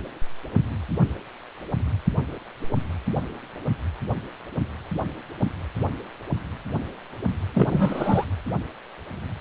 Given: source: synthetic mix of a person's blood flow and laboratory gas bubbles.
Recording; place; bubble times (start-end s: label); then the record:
Doppler ultrasound of blood flow; precordium
7.54-8.25 s: bubbles
From the record:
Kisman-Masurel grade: 212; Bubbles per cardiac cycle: several, 3 to 8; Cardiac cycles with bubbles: 1 to 10%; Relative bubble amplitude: moderate (0.250 to 0.450); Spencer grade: 1 (occasional bubble signal discernible with the cardiac motion signal, with majority of cardiac periods free of bubbles); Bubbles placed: anywhere in the cardiac cycle